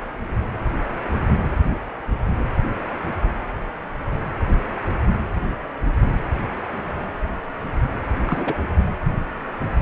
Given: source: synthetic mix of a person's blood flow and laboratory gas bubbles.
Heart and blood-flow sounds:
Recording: Doppler ultrasound of blood flow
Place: precordium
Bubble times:
8.25-8.55 s: bubbles
From the record:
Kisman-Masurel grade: 221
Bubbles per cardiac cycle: several, 3 to 8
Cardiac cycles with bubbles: 10 to 50%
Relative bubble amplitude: barely perceptible (0.100 to 0.250)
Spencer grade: 2 (many but less than half of the cardiac periods contain bubble signals, singularly or in groups)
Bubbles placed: anywhere in the cardiac cycle

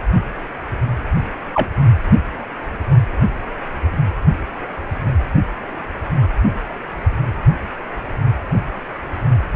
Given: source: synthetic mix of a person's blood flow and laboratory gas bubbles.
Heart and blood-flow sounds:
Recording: Doppler ultrasound of blood flow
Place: precordium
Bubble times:
1.53-1.68 s: bubbles
From the record:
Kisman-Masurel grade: 113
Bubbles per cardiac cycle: 1 to 2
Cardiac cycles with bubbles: 1 to 10%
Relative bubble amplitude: loud (0.450 to 0.775)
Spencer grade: 1 (occasional bubble signal discernible with the cardiac motion signal, with majority of cardiac periods free of bubbles)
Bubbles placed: only in the low amplitude regions of the cardiac cycle

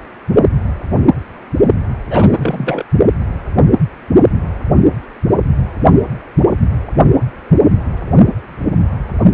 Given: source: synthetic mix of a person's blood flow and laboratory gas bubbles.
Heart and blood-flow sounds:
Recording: Doppler ultrasound of blood flow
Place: precordium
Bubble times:
2.10-2.83 s: bubbles
From the record:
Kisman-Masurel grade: 213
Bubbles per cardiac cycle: several, 3 to 8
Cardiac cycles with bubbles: 1 to 10%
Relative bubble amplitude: loud (0.450 to 0.775)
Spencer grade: 1 (occasional bubble signal discernible with the cardiac motion signal, with majority of cardiac periods free of bubbles)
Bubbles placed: only in the low amplitude regions of the cardiac cycle

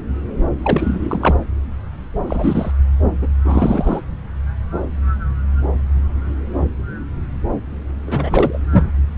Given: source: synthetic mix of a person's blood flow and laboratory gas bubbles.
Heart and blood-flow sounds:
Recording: Doppler ultrasound of blood flow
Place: subclavian vein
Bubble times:
0.62-1.35 s: bubbles
2.27-2.71 s: bubbles
3.21-3.27 s: bubbles
3.44-4.01 s: bubbles
8.07-8.58 s: bubbles
8.72-8.88 s: bubbles
From the record:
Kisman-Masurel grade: 332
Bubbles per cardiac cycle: rolling drumbeat, 9 or more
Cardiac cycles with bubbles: 50 to 99%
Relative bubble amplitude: moderate (0.250 to 0.450)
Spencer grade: 3 (all of the cardiac periods contain showers or single bubble signals, but not dominating or overriding the cardiac motion signals)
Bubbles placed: anywhere in the cardiac cycle

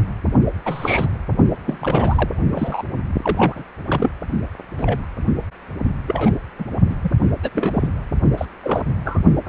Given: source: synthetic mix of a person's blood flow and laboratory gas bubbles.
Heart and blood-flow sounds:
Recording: Doppler ultrasound of blood flow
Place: precordium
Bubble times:
0.65-1.08 s: bubbles
1.65-1.78 s: bubbles
1.80-2.30 s: bubbles
2.52-2.85 s: bubbles
3.22-3.64 s: bubbles
3.87-4.11 s: bubbles
4.78-5.06 s: bubbles
6.07-6.32 s: bubbles
6.58-6.65 s: bubbles
6.89-6.95 s: bubbles
7.03-7.10 s: bubbles
7.42-7.49 s: bubbles
7.54-7.88 s: bubbles
8.38-8.46 s: bubbles
8.63-8.81 s: bubbles
9.05-9.21 s: bubbles
9.46-9.48 s: bubbles
From the record:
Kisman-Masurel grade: 232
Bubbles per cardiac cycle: several, 3 to 8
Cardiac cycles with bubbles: 50 to 99%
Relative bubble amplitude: moderate (0.250 to 0.450)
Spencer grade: 3 (all of the cardiac periods contain showers or single bubble signals, but not dominating or overriding the cardiac motion signals)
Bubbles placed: only in the low amplitude regions of the cardiac cycle

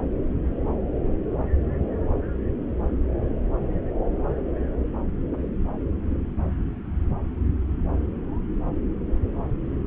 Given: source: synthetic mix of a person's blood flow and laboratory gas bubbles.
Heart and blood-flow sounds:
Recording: Doppler ultrasound of blood flow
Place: subclavian vein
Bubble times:
no bubbles
From the record:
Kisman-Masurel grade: 000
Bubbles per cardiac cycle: 0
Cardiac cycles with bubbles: 0%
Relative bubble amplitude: no bubbles discernible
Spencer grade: 0 (complete lack of bubble signals)

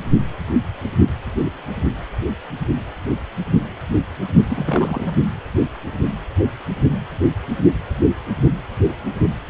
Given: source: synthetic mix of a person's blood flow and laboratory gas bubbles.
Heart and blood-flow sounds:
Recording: Doppler ultrasound of blood flow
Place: precordium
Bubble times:
4.48-5.12 s: bubbles
From the record:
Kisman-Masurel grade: 211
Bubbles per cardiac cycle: several, 3 to 8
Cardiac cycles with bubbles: 1 to 10%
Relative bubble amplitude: barely perceptible (0.100 to 0.250)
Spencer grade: 1 (occasional bubble signal discernible with the cardiac motion signal, with majority of cardiac periods free of bubbles)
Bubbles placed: only in the low amplitude regions of the cardiac cycle

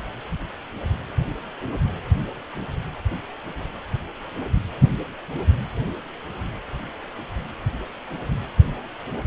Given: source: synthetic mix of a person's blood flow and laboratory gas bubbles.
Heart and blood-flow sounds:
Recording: Doppler ultrasound of blood flow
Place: precordium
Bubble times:
no bubbles
From the record:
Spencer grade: 0 (complete lack of bubble signals)

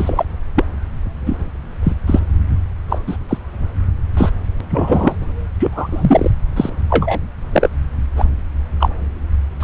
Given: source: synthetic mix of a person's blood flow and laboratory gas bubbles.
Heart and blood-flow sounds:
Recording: Doppler ultrasound of blood flow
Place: subclavian vein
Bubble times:
0.00-0.24 s: bubbles
0.56-0.64 s: bubbles
1.26-1.36 s: bubbles
1.83-1.93 s: bubbles
2.06-2.20 s: bubbles
2.89-2.99 s: bubbles
3.06-3.17 s: bubbles
3.29-3.38 s: bubbles
4.17-4.29 s: bubbles
4.70-5.15 s: bubbles
5.58-6.31 s: bubbles
6.56-6.69 s: bubbles
6.89-7.19 s: bubbles
7.52-7.68 s: bubbles
8.16-8.24 s: bubbles
8.79-8.89 s: bubbles
9.59-9.64 s: bubbles
From the record:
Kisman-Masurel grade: 243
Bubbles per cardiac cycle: several, 3 to 8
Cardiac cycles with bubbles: 100%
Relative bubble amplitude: loud (0.450 to 0.775)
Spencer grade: 3 (all of the cardiac periods contain showers or single bubble signals, but not dominating or overriding the cardiac motion signals)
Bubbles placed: anywhere in the cardiac cycle

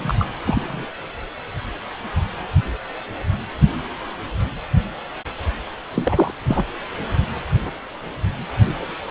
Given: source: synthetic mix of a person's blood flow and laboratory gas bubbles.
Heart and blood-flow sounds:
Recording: Doppler ultrasound of blood flow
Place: precordium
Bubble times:
0.00-0.15 s: bubbles
0.19-0.28 s: bubbles
0.45-0.85 s: bubbles
5.93-6.31 s: bubbles
6.47-6.65 s: bubbles
9.09-9.11 s: bubbles
From the record:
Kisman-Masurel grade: 222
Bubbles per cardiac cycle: several, 3 to 8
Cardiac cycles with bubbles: 10 to 50%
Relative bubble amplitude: moderate (0.250 to 0.450)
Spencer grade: 2 (many but less than half of the cardiac periods contain bubble signals, singularly or in groups)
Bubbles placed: anywhere in the cardiac cycle

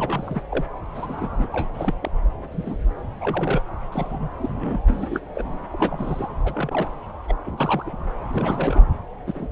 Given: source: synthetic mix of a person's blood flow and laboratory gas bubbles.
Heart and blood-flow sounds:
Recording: Doppler ultrasound of blood flow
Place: subclavian vein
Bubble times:
0.00-0.43 s: bubbles
0.50-0.65 s: bubbles
0.94-1.46 s: bubbles
1.51-1.68 s: bubbles
1.74-1.94 s: bubbles
2.02-2.10 s: bubbles
2.52-2.78 s: bubbles
3.21-3.62 s: bubbles
3.92-4.29 s: bubbles
4.39-4.80 s: bubbles
4.87-5.20 s: bubbles
5.35-5.69 s: bubbles
5.72-6.28 s: bubbles
6.44-6.89 s: bubbles
7.28-7.33 s: bubbles
7.46-7.96 s: bubbles
8.33-8.85 s: bubbles
9.26-9.47 s: bubbles
From the record:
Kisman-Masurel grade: 242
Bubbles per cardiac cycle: several, 3 to 8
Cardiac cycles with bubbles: 100%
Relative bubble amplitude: moderate (0.250 to 0.450)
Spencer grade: 3 (all of the cardiac periods contain showers or single bubble signals, but not dominating or overriding the cardiac motion signals)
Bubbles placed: anywhere in the cardiac cycle

